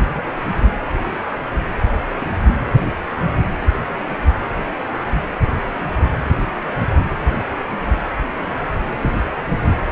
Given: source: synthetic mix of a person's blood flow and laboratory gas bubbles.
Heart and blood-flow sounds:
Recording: Doppler ultrasound of blood flow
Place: precordium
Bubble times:
0.00-0.21 s: bubbles
0.52-0.57 s: bubbles
2.21-2.25 s: bubbles
8.99-9.10 s: bubbles
From the record:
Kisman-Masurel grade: 121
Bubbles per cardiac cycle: 1 to 2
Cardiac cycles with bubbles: 10 to 50%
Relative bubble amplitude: barely perceptible (0.100 to 0.250)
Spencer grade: 2 (many but less than half of the cardiac periods contain bubble signals, singularly or in groups)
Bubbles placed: anywhere in the cardiac cycle

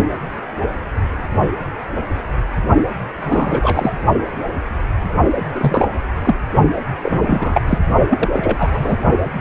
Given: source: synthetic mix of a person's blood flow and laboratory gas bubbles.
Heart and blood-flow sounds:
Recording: Doppler ultrasound of blood flow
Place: precordium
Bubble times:
3.12-3.93 s: bubbles
5.54-5.87 s: bubbles
6.25-6.36 s: bubbles
6.75-6.81 s: bubbles
7.03-7.61 s: bubbles
7.67-7.79 s: bubbles
8.10-8.29 s: bubbles
8.32-8.97 s: bubbles
From the record:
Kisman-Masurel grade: 223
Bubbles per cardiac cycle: several, 3 to 8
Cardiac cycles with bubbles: 10 to 50%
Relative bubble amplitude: loud (0.450 to 0.775)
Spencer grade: 2 (many but less than half of the cardiac periods contain bubble signals, singularly or in groups)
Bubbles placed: only in the low amplitude regions of the cardiac cycle

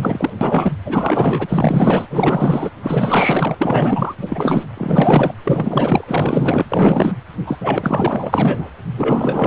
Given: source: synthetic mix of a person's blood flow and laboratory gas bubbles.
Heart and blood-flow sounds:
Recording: Doppler ultrasound of blood flow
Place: precordium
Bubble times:
0.00-0.30 s: bubbles
0.41-0.73 s: bubbles
0.84-2.06 s: bubbles
2.10-2.71 s: bubbles
2.83-3.54 s: bubbles
3.58-4.15 s: bubbles
4.17-4.64 s: bubbles
4.77-5.33 s: bubbles
5.43-6.04 s: bubbles
6.08-6.65 s: bubbles
6.68-7.13 s: bubbles
7.46-7.57 s: bubbles
7.60-8.69 s: bubbles
8.97-9.47 s: bubbles
From the record:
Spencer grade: 4 (maximum detectable bubble signal sounding continuously throughout systole and diastole of every cardiac period, and overriding the amplitude of the normal cardiac signals)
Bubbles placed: anywhere in the cardiac cycle

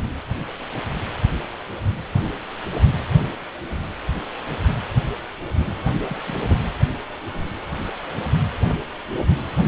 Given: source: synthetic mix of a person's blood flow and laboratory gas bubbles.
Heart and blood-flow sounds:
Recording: Doppler ultrasound of blood flow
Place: precordium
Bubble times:
6.08-6.16 s: bubbles
6.27-6.57 s: bubbles
From the record:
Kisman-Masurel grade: 211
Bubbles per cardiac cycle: several, 3 to 8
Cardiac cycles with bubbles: 1 to 10%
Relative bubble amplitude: barely perceptible (0.100 to 0.250)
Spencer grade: 1 (occasional bubble signal discernible with the cardiac motion signal, with majority of cardiac periods free of bubbles)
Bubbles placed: anywhere in the cardiac cycle

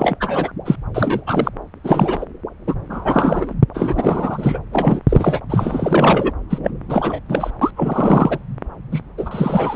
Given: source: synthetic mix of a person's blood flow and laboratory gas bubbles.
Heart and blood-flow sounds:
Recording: Doppler ultrasound of blood flow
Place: subclavian vein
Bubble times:
0.00-0.17 s: bubbles
0.20-0.52 s: bubbles
0.65-0.76 s: bubbles
0.95-1.21 s: bubbles
1.27-1.49 s: bubbles
1.84-2.25 s: bubbles
2.67-2.75 s: bubbles
2.90-3.54 s: bubbles
3.74-4.60 s: bubbles
4.72-5.00 s: bubbles
5.08-5.40 s: bubbles
5.49-6.32 s: bubbles
6.50-6.61 s: bubbles
6.63-6.71 s: bubbles
6.88-7.20 s: bubbles
7.29-7.50 s: bubbles
7.61-7.71 s: bubbles
7.76-8.38 s: bubbles
8.91-9.00 s: bubbles
9.17-9.76 s: bubbles
From the record:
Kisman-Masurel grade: 343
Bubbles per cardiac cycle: rolling drumbeat, 9 or more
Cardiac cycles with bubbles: 100%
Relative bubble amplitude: loud (0.450 to 0.775)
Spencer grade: 3 (all of the cardiac periods contain showers or single bubble signals, but not dominating or overriding the cardiac motion signals)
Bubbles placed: anywhere in the cardiac cycle

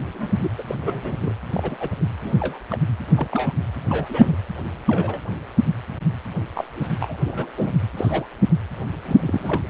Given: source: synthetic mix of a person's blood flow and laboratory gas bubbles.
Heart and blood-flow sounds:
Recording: Doppler ultrasound of blood flow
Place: precordium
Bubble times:
0.14-0.35 s: bubbles
0.44-0.51 s: bubbles
0.57-0.62 s: bubbles
0.68-0.75 s: bubbles
0.81-1.34 s: bubbles
1.52-1.77 s: bubbles
1.80-1.89 s: bubbles
2.00-2.08 s: bubbles
2.21-2.58 s: bubbles
2.69-2.77 s: bubbles
3.17-3.27 s: bubbles
3.32-3.52 s: bubbles
3.88-4.36 s: bubbles
4.88-5.21 s: bubbles
5.29-5.35 s: bubbles
6.54-6.88 s: bubbles
7.00-7.17 s: bubbles
7.25-7.50 s: bubbles
7.57-7.71 s: bubbles
7.97-8.26 s: bubbles
9.05-9.62 s: bubbles
From the record:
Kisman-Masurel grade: 242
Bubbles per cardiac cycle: several, 3 to 8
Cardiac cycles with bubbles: 100%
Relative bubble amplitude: moderate (0.250 to 0.450)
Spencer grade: 3 (all of the cardiac periods contain showers or single bubble signals, but not dominating or overriding the cardiac motion signals)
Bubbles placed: anywhere in the cardiac cycle

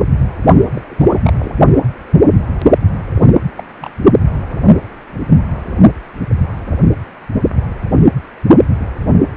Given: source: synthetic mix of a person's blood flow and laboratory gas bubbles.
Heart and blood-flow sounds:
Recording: Doppler ultrasound of blood flow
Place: precordium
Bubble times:
0.73-0.81 s: bubbles
0.90-1.33 s: bubbles
1.39-1.58 s: bubbles
3.08-3.27 s: bubbles
3.57-3.63 s: bubbles
3.80-3.91 s: bubbles
From the record:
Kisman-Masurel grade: 222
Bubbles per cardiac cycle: several, 3 to 8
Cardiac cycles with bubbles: 10 to 50%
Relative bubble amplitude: moderate (0.250 to 0.450)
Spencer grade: 2 (many but less than half of the cardiac periods contain bubble signals, singularly or in groups)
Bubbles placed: only in the low amplitude regions of the cardiac cycle

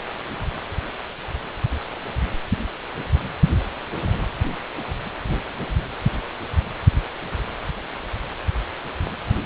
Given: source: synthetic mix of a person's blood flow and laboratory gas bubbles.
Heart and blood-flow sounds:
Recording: Doppler ultrasound of blood flow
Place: precordium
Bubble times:
no bubbles
From the record:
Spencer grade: 0 (complete lack of bubble signals)

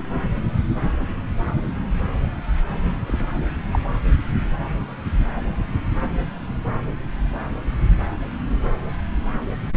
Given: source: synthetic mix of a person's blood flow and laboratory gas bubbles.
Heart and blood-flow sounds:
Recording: Doppler ultrasound of blood flow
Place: subclavian vein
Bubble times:
3.07-3.27 s: bubbles
3.36-3.48 s: bubbles
3.73-3.79 s: bubbles
From the record:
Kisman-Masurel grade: 211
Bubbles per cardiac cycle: several, 3 to 8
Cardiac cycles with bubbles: 1 to 10%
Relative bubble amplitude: barely perceptible (0.100 to 0.250)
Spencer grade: 1 (occasional bubble signal discernible with the cardiac motion signal, with majority of cardiac periods free of bubbles)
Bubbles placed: anywhere in the cardiac cycle

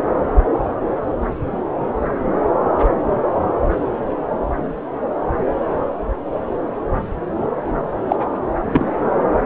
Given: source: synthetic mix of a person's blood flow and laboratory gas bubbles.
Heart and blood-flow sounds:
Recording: Doppler ultrasound of blood flow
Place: subclavian vein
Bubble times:
8.08-8.16 s: bubbles
8.72-8.86 s: bubbles
From the record:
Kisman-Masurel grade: 123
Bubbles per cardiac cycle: 1 to 2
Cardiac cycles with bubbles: 10 to 50%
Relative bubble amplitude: loud (0.450 to 0.775)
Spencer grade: 2 (many but less than half of the cardiac periods contain bubble signals, singularly or in groups)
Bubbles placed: anywhere in the cardiac cycle

